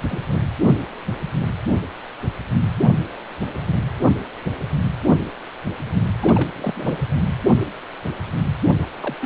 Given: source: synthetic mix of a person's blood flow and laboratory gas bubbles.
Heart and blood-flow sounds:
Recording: Doppler ultrasound of blood flow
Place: precordium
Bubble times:
0.09-0.22 s: bubbles
0.29-0.43 s: bubbles
6.21-6.50 s: bubbles
6.56-6.99 s: bubbles
8.82-8.85 s: bubbles
9.00-9.16 s: bubbles
9.21-9.26 s: bubbles
From the record:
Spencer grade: 2 (many but less than half of the cardiac periods contain bubble signals, singularly or in groups)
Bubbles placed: anywhere in the cardiac cycle

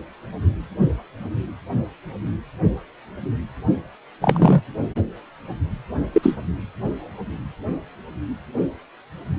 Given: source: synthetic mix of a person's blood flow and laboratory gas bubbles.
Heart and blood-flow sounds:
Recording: Doppler ultrasound of blood flow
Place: precordium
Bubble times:
4.21-4.61 s: bubbles
6.12-6.35 s: bubbles
From the record:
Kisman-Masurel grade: 123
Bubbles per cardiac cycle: 1 to 2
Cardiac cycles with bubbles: 10 to 50%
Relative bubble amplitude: loud (0.450 to 0.775)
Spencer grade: 2 (many but less than half of the cardiac periods contain bubble signals, singularly or in groups)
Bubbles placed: only in the low amplitude regions of the cardiac cycle

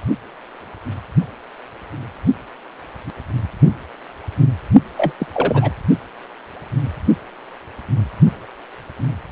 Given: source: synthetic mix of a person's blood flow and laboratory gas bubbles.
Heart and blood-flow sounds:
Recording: Doppler ultrasound of blood flow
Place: precordium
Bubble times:
4.97-5.12 s: bubbles
5.19-5.26 s: bubbles
5.33-5.71 s: bubbles
From the record:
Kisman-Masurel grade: 212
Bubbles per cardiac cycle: several, 3 to 8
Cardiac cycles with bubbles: 1 to 10%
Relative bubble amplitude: moderate (0.250 to 0.450)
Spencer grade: 1 (occasional bubble signal discernible with the cardiac motion signal, with majority of cardiac periods free of bubbles)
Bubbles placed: only in the low amplitude regions of the cardiac cycle

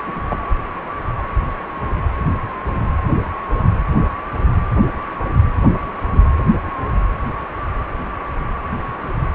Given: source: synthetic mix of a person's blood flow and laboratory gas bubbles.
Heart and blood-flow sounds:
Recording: Doppler ultrasound of blood flow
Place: precordium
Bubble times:
0.06-0.21 s: bubbles
0.28-0.39 s: bubbles
From the record:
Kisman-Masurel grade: 112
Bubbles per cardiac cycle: 1 to 2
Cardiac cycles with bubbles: 1 to 10%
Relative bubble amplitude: moderate (0.250 to 0.450)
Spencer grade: 1 (occasional bubble signal discernible with the cardiac motion signal, with majority of cardiac periods free of bubbles)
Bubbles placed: anywhere in the cardiac cycle

